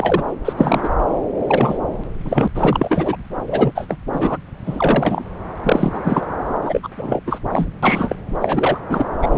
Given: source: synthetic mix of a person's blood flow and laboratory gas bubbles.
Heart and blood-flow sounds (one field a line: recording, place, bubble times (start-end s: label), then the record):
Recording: Doppler ultrasound of blood flow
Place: subclavian vein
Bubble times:
0.00-0.24 s: bubbles
0.45-0.53 s: bubbles
0.57-0.90 s: bubbles
1.46-1.78 s: bubbles
2.24-2.48 s: bubbles
2.55-3.17 s: bubbles
3.46-3.72 s: bubbles
3.75-3.97 s: bubbles
4.12-4.39 s: bubbles
4.66-5.24 s: bubbles
5.62-6.26 s: bubbles
6.65-6.89 s: bubbles
6.97-7.23 s: bubbles
7.26-7.39 s: bubbles
7.50-7.66 s: bubbles
7.82-8.15 s: bubbles
8.39-8.78 s: bubbles
8.89-9.06 s: bubbles
9.22-9.38 s: bubbles
From the record:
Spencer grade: 3 (all of the cardiac periods contain showers or single bubble signals, but not dominating or overriding the cardiac motion signals)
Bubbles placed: anywhere in the cardiac cycle